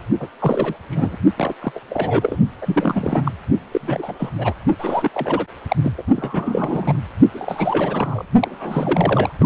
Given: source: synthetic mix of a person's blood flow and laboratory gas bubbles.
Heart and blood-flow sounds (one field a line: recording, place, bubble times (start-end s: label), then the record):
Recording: Doppler ultrasound of blood flow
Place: precordium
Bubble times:
0.19-0.28 s: bubbles
0.40-0.74 s: bubbles
0.90-1.16 s: bubbles
1.36-1.54 s: bubbles
1.62-1.72 s: bubbles
1.75-1.79 s: bubbles
1.90-2.39 s: bubbles
2.62-3.31 s: bubbles
3.71-4.15 s: bubbles
4.19-4.29 s: bubbles
4.38-4.54 s: bubbles
4.79-5.09 s: bubbles
5.13-5.45 s: bubbles
5.68-5.76 s: bubbles
5.84-5.92 s: bubbles
5.98-6.03 s: bubbles
6.16-6.97 s: bubbles
7.33-8.25 s: bubbles
8.39-9.32 s: bubbles
9.40-9.45 s: bubbles
From the record:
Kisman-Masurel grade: 342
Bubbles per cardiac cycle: rolling drumbeat, 9 or more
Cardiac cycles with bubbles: 100%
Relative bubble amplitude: moderate (0.250 to 0.450)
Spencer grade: 3 (all of the cardiac periods contain showers or single bubble signals, but not dominating or overriding the cardiac motion signals)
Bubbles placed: only in the low amplitude regions of the cardiac cycle